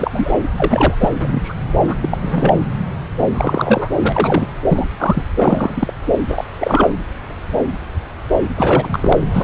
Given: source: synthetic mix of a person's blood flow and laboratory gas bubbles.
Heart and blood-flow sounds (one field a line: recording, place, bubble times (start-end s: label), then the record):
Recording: Doppler ultrasound of blood flow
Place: subclavian vein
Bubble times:
0.00-0.31 s: bubbles
0.56-0.94 s: bubbles
0.99-1.08 s: bubbles
1.20-1.53 s: bubbles
1.87-1.95 s: bubbles
2.01-2.17 s: bubbles
2.21-2.54 s: bubbles
3.33-3.90 s: bubbles
4.02-4.46 s: bubbles
4.67-4.86 s: bubbles
4.98-5.23 s: bubbles
5.38-5.93 s: bubbles
6.29-6.44 s: bubbles
6.58-6.88 s: bubbles
8.56-9.18 s: bubbles
9.33-9.43 s: bubbles
From the record:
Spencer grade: 3 (all of the cardiac periods contain showers or single bubble signals, but not dominating or overriding the cardiac motion signals)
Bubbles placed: anywhere in the cardiac cycle